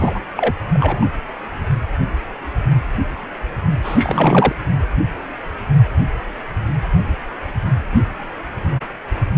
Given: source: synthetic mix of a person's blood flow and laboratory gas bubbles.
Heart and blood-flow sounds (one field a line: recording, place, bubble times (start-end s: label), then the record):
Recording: Doppler ultrasound of blood flow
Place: precordium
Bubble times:
0.00-0.21 s: bubbles
0.36-0.53 s: bubbles
0.73-1.10 s: bubbles
3.83-4.53 s: bubbles
From the record:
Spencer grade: 2 (many but less than half of the cardiac periods contain bubble signals, singularly or in groups)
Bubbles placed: anywhere in the cardiac cycle